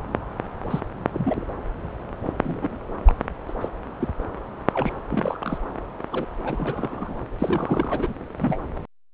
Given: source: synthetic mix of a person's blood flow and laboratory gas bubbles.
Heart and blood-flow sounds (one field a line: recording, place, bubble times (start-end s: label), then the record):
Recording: Doppler ultrasound of blood flow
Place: subclavian vein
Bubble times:
0.70-0.80 s: bubbles
1.14-1.44 s: bubbles
2.43-2.79 s: bubbles
3.06-3.14 s: bubbles
3.49-3.53 s: bubbles
3.60-3.69 s: bubbles
4.00-4.08 s: bubbles
4.74-4.93 s: bubbles
5.09-5.58 s: bubbles
6.12-6.25 s: bubbles
6.44-7.16 s: bubbles
7.38-8.13 s: bubbles
8.38-8.59 s: bubbles
From the record:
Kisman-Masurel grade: 242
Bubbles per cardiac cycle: several, 3 to 8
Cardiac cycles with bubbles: 100%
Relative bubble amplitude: moderate (0.250 to 0.450)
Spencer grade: 3 (all of the cardiac periods contain showers or single bubble signals, but not dominating or overriding the cardiac motion signals)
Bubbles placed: anywhere in the cardiac cycle